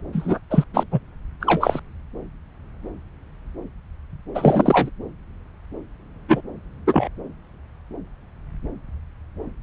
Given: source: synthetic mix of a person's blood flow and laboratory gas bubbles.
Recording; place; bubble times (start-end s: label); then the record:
Doppler ultrasound of blood flow; subclavian vein
0.12-0.39 s: bubbles
0.50-0.64 s: bubbles
0.73-0.84 s: bubbles
0.92-1.00 s: bubbles
1.40-1.80 s: bubbles
4.35-4.90 s: bubbles
6.28-6.41 s: bubbles
6.87-7.09 s: bubbles
From the record:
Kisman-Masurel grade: 223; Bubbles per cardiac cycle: several, 3 to 8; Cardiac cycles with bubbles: 10 to 50%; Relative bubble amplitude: loud (0.450 to 0.775); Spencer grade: 2 (many but less than half of the cardiac periods contain bubble signals, singularly or in groups); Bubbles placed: anywhere in the cardiac cycle